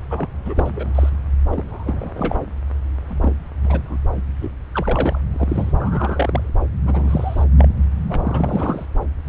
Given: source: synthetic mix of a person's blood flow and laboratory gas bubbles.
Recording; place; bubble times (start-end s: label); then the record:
Doppler ultrasound of blood flow; subclavian vein
0.10-0.28 s: bubbles
0.45-1.09 s: bubbles
1.50-2.35 s: bubbles
3.08-3.47 s: bubbles
3.62-3.98 s: bubbles
4.17-4.22 s: bubbles
4.42-4.50 s: bubbles
4.72-5.19 s: bubbles
5.33-5.73 s: bubbles
5.80-6.49 s: bubbles
6.85-7.45 s: bubbles
7.58-7.69 s: bubbles
8.09-8.85 s: bubbles
From the record:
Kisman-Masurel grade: 242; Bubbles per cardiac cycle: several, 3 to 8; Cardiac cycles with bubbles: 100%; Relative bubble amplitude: moderate (0.250 to 0.450); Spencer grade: 3 (all of the cardiac periods contain showers or single bubble signals, but not dominating or overriding the cardiac motion signals); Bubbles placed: anywhere in the cardiac cycle